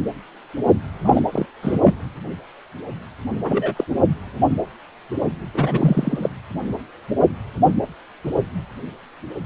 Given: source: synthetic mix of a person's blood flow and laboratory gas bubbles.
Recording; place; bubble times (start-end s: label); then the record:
Doppler ultrasound of blood flow; precordium
1.04-1.26 s: bubbles
1.33-1.46 s: bubbles
1.62-1.80 s: bubbles
1.82-1.94 s: bubbles
3.44-3.85 s: bubbles
5.54-6.29 s: bubbles
From the record:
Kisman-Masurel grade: 222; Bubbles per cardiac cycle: several, 3 to 8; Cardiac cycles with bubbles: 10 to 50%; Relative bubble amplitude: moderate (0.250 to 0.450); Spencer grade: 2 (many but less than half of the cardiac periods contain bubble signals, singularly or in groups); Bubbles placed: anywhere in the cardiac cycle